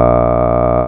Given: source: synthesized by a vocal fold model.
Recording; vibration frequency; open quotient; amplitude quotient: sustained vowel; 60 Hz; 0.4; 1.4